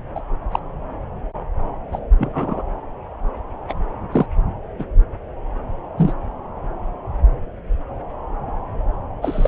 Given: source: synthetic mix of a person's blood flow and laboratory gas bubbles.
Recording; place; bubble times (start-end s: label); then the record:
Doppler ultrasound of blood flow; subclavian vein
0.15-0.21 s: bubbles
0.52-0.59 s: bubbles
1.92-1.99 s: bubbles
2.18-2.62 s: bubbles
3.69-3.73 s: bubbles
4.12-4.26 s: bubbles
4.79-4.84 s: bubbles
5.98-6.13 s: bubbles
9.21-9.48 s: bubbles
From the record:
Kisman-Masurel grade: 123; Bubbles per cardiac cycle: 1 to 2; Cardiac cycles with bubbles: 10 to 50%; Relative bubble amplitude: loud (0.450 to 0.775); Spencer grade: 2 (many but less than half of the cardiac periods contain bubble signals, singularly or in groups); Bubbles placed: anywhere in the cardiac cycle